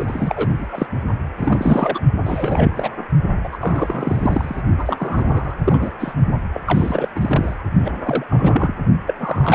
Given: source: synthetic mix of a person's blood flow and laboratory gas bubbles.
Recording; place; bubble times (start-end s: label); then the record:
Doppler ultrasound of blood flow; precordium
0.00-0.50 s: bubbles
0.58-0.66 s: bubbles
0.70-0.87 s: bubbles
1.37-2.01 s: bubbles
2.25-2.89 s: bubbles
3.44-3.58 s: bubbles
3.60-4.62 s: bubbles
4.78-5.54 s: bubbles
5.65-5.92 s: bubbles
5.99-6.12 s: bubbles
6.53-6.61 s: bubbles
6.66-7.10 s: bubbles
7.15-7.55 s: bubbles
7.82-8.24 s: bubbles
8.29-8.73 s: bubbles
9.07-9.14 s: bubbles
9.19-9.55 s: bubbles
From the record:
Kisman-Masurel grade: 333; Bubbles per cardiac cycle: rolling drumbeat, 9 or more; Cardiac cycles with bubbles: 50 to 99%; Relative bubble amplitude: loud (0.450 to 0.775); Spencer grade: 3 (all of the cardiac periods contain showers or single bubble signals, but not dominating or overriding the cardiac motion signals); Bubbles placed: only in the low amplitude regions of the cardiac cycle